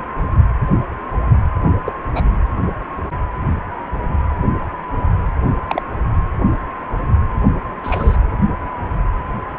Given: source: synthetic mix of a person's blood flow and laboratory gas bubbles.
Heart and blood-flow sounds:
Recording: Doppler ultrasound of blood flow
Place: precordium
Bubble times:
1.85-1.92 s: bubbles
2.10-2.30 s: bubbles
5.67-5.82 s: bubbles
7.83-8.16 s: bubbles
From the record:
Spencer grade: 2 (many but less than half of the cardiac periods contain bubble signals, singularly or in groups)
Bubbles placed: anywhere in the cardiac cycle

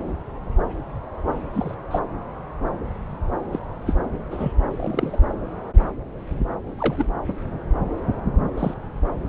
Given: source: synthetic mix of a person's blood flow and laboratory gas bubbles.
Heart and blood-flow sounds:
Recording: Doppler ultrasound of blood flow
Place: subclavian vein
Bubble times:
1.53-1.75 s: bubbles
1.90-1.99 s: bubbles
3.52-3.59 s: bubbles
3.86-3.94 s: bubbles
4.31-4.53 s: bubbles
4.70-5.19 s: bubbles
6.78-7.04 s: bubbles
8.57-8.74 s: bubbles
From the record:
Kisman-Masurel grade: 122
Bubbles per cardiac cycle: 1 to 2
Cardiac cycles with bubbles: 10 to 50%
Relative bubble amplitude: moderate (0.250 to 0.450)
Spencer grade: 2 (many but less than half of the cardiac periods contain bubble signals, singularly or in groups)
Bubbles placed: anywhere in the cardiac cycle

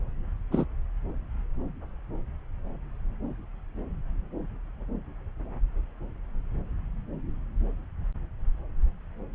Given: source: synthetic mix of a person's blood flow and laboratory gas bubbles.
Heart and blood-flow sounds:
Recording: Doppler ultrasound of blood flow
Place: subclavian vein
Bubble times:
0.51-0.65 s: bubbles
From the record:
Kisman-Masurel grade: 113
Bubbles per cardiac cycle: 1 to 2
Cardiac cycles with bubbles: 1 to 10%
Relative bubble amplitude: loud (0.450 to 0.775)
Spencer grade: 1 (occasional bubble signal discernible with the cardiac motion signal, with majority of cardiac periods free of bubbles)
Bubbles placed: anywhere in the cardiac cycle

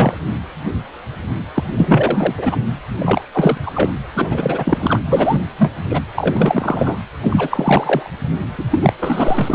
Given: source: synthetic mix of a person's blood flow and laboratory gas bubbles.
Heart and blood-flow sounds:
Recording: Doppler ultrasound of blood flow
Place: precordium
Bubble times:
0.00-0.15 s: bubbles
1.55-1.64 s: bubbles
1.78-2.56 s: bubbles
2.98-3.22 s: bubbles
3.33-3.58 s: bubbles
3.62-3.71 s: bubbles
3.75-3.90 s: bubbles
4.16-5.00 s: bubbles
5.05-5.41 s: bubbles
5.58-5.72 s: bubbles
5.89-6.00 s: bubbles
6.15-6.97 s: bubbles
7.22-8.11 s: bubbles
8.57-8.65 s: bubbles
8.71-8.93 s: bubbles
8.98-9.55 s: bubbles
From the record:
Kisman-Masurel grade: 333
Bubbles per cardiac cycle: rolling drumbeat, 9 or more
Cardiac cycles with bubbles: 50 to 99%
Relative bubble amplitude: loud (0.450 to 0.775)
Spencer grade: 3 (all of the cardiac periods contain showers or single bubble signals, but not dominating or overriding the cardiac motion signals)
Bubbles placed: anywhere in the cardiac cycle

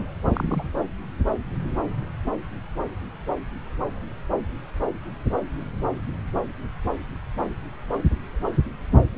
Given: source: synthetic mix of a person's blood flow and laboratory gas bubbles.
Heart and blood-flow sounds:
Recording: Doppler ultrasound of blood flow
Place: subclavian vein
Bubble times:
0.33-0.69 s: bubbles
From the record:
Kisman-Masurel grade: 121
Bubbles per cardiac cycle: 1 to 2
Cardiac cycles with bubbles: 10 to 50%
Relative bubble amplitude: barely perceptible (0.100 to 0.250)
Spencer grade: 2 (many but less than half of the cardiac periods contain bubble signals, singularly or in groups)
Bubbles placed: anywhere in the cardiac cycle

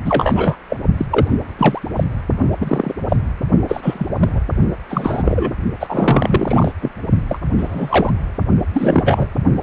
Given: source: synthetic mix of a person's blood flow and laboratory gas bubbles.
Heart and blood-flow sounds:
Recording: Doppler ultrasound of blood flow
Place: precordium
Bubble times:
0.05-0.58 s: bubbles
0.70-0.77 s: bubbles
0.97-1.05 s: bubbles
1.10-1.27 s: bubbles
1.58-1.80 s: bubbles
1.95-2.04 s: bubbles
2.60-2.94 s: bubbles
3.08-3.17 s: bubbles
3.68-4.09 s: bubbles
4.20-4.29 s: bubbles
4.33-4.42 s: bubbles
4.89-5.54 s: bubbles
5.79-6.71 s: bubbles
6.81-6.92 s: bubbles
7.29-7.39 s: bubbles
7.58-8.12 s: bubbles
8.73-9.27 s: bubbles
From the record:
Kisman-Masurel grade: 243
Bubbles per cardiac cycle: several, 3 to 8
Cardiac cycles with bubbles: 100%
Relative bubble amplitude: loud (0.450 to 0.775)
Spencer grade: 3 (all of the cardiac periods contain showers or single bubble signals, but not dominating or overriding the cardiac motion signals)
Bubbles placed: only in the low amplitude regions of the cardiac cycle

